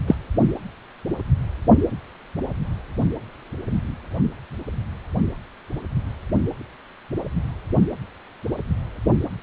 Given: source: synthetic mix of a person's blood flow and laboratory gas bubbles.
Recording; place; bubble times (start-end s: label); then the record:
Doppler ultrasound of blood flow; precordium
0.07-0.14 s: bubbles
From the record:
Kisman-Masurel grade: 123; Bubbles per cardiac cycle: 1 to 2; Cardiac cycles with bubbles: 10 to 50%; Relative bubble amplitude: loud (0.450 to 0.775); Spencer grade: 2 (many but less than half of the cardiac periods contain bubble signals, singularly or in groups); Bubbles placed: only in the low amplitude regions of the cardiac cycle